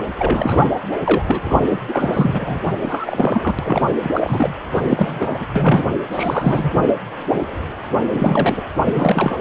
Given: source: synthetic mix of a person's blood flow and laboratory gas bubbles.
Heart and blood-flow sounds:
Doppler ultrasound of blood flow; precordium
0.17-0.71 s: bubbles
1.04-1.24 s: bubbles
1.26-1.60 s: bubbles
1.68-1.81 s: bubbles
1.88-2.60 s: bubbles
2.82-3.56 s: bubbles
3.59-3.82 s: bubbles
4.03-4.11 s: bubbles
4.13-4.54 s: bubbles
4.74-5.46 s: bubbles
5.55-5.86 s: bubbles
6.12-6.70 s: bubbles
8.12-8.64 s: bubbles
8.84-9.38 s: bubbles
From the record:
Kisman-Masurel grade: 332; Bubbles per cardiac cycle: rolling drumbeat, 9 or more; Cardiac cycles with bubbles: 50 to 99%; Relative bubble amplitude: moderate (0.250 to 0.450); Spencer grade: 3 (all of the cardiac periods contain showers or single bubble signals, but not dominating or overriding the cardiac motion signals); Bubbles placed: anywhere in the cardiac cycle

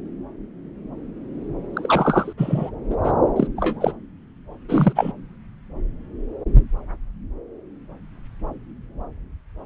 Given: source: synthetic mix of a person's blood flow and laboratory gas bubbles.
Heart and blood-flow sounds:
Doppler ultrasound of blood flow; subclavian vein
1.73-2.33 s: bubbles
2.38-2.71 s: bubbles
2.90-2.96 s: bubbles
3.04-3.12 s: bubbles
3.36-3.48 s: bubbles
3.57-3.92 s: bubbles
4.69-4.93 s: bubbles
4.96-5.12 s: bubbles
From the record:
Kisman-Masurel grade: 223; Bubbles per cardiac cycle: several, 3 to 8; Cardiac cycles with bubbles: 10 to 50%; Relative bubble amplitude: loud (0.450 to 0.775); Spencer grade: 2 (many but less than half of the cardiac periods contain bubble signals, singularly or in groups); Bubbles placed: anywhere in the cardiac cycle

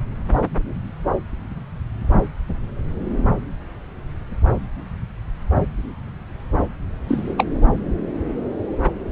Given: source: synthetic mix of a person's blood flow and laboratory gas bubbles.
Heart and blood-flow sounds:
Doppler ultrasound of blood flow; subclavian vein
7.08-7.34 s: bubbles
7.38-7.46 s: bubbles
From the record:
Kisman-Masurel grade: 113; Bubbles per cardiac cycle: 1 to 2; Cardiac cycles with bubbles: 1 to 10%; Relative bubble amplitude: loud (0.450 to 0.775); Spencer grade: 1 (occasional bubble signal discernible with the cardiac motion signal, with majority of cardiac periods free of bubbles); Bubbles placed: anywhere in the cardiac cycle

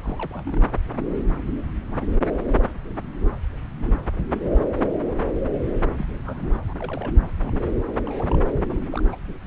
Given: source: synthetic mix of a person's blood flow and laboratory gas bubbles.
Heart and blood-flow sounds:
Doppler ultrasound of blood flow; subclavian vein
0.00-0.61 s: bubbles
5.97-6.06 s: bubbles
6.24-6.53 s: bubbles
6.60-6.75 s: bubbles
6.77-7.16 s: bubbles
7.21-7.29 s: bubbles
7.42-7.68 s: bubbles
8.04-8.43 s: bubbles
8.69-8.81 s: bubbles
8.91-9.02 s: bubbles
9.05-9.15 s: bubbles
9.28-9.33 s: bubbles
From the record:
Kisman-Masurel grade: 221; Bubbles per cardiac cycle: several, 3 to 8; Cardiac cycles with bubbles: 10 to 50%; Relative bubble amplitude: barely perceptible (0.100 to 0.250); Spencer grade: 2 (many but less than half of the cardiac periods contain bubble signals, singularly or in groups); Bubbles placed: anywhere in the cardiac cycle

